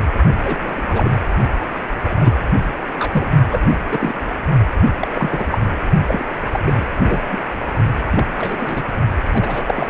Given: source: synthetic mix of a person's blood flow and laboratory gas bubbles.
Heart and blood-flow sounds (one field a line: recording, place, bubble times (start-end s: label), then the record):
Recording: Doppler ultrasound of blood flow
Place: precordium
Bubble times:
0.43-1.10 s: bubbles
2.04-2.36 s: bubbles
2.94-3.31 s: bubbles
3.50-3.62 s: bubbles
3.69-3.75 s: bubbles
3.91-4.15 s: bubbles
5.00-5.08 s: bubbles
5.11-5.59 s: bubbles
6.07-6.26 s: bubbles
6.50-6.60 s: bubbles
6.65-6.85 s: bubbles
7.04-7.19 s: bubbles
7.32-7.42 s: bubbles
8.10-8.25 s: bubbles
8.37-8.83 s: bubbles
9.33-9.64 s: bubbles
9.67-9.90 s: bubbles
From the record:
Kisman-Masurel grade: 242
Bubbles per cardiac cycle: several, 3 to 8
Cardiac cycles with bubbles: 100%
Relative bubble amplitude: moderate (0.250 to 0.450)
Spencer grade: 3 (all of the cardiac periods contain showers or single bubble signals, but not dominating or overriding the cardiac motion signals)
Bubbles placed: only in the low amplitude regions of the cardiac cycle